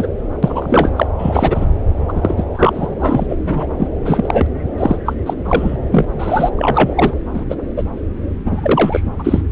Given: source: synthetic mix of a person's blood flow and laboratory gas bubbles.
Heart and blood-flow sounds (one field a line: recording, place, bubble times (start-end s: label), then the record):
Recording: Doppler ultrasound of blood flow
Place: subclavian vein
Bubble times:
0.00-0.07 s: bubbles
0.42-0.92 s: bubbles
0.96-1.07 s: bubbles
1.19-1.66 s: bubbles
2.08-2.12 s: bubbles
2.15-2.45 s: bubbles
2.54-2.94 s: bubbles
2.99-3.37 s: bubbles
3.46-3.66 s: bubbles
3.77-3.88 s: bubbles
4.05-4.46 s: bubbles
4.78-4.96 s: bubbles
5.05-5.13 s: bubbles
5.26-5.33 s: bubbles
5.45-5.76 s: bubbles
5.91-6.07 s: bubbles
6.19-6.50 s: bubbles
6.58-7.13 s: bubbles
7.33-7.45 s: bubbles
7.50-7.55 s: bubbles
7.76-7.84 s: bubbles
8.45-9.01 s: bubbles
9.19-9.42 s: bubbles
From the record:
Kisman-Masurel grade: 243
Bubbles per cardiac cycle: several, 3 to 8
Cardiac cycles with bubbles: 100%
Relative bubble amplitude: loud (0.450 to 0.775)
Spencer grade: 3 (all of the cardiac periods contain showers or single bubble signals, but not dominating or overriding the cardiac motion signals)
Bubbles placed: anywhere in the cardiac cycle